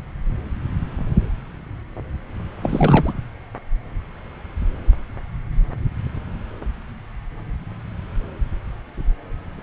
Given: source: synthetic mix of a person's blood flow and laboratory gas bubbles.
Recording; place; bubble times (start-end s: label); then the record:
Doppler ultrasound of blood flow; subclavian vein
2.63-3.14 s: bubbles
From the record:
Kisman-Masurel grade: 212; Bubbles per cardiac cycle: several, 3 to 8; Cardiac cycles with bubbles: 1 to 10%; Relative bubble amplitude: moderate (0.250 to 0.450); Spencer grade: 1 (occasional bubble signal discernible with the cardiac motion signal, with majority of cardiac periods free of bubbles); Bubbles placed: anywhere in the cardiac cycle